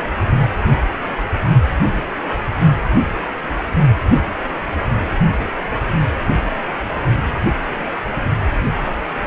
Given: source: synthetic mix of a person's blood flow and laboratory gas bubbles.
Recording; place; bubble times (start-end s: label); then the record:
Doppler ultrasound of blood flow; precordium
no bubbles
From the record:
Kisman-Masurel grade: 000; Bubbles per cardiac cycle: 0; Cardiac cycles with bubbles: 0%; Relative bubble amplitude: no bubbles discernible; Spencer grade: 0 (complete lack of bubble signals)